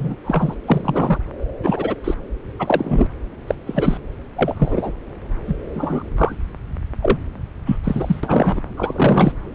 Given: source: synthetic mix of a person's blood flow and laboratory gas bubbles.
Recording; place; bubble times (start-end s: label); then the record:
Doppler ultrasound of blood flow; subclavian vein
0.00-0.15 s: bubbles
0.25-0.54 s: bubbles
0.66-1.18 s: bubbles
1.62-1.96 s: bubbles
2.04-2.15 s: bubbles
2.59-3.08 s: bubbles
3.47-3.54 s: bubbles
3.67-3.98 s: bubbles
4.36-4.93 s: bubbles
5.47-5.56 s: bubbles
5.74-6.10 s: bubbles
6.17-6.36 s: bubbles
7.02-7.18 s: bubbles
7.66-7.77 s: bubbles
7.84-8.21 s: bubbles
8.23-8.61 s: bubbles
8.77-9.32 s: bubbles
From the record:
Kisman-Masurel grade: 243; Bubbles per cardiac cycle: several, 3 to 8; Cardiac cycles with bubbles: 100%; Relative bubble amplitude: loud (0.450 to 0.775); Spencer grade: 3 (all of the cardiac periods contain showers or single bubble signals, but not dominating or overriding the cardiac motion signals); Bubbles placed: anywhere in the cardiac cycle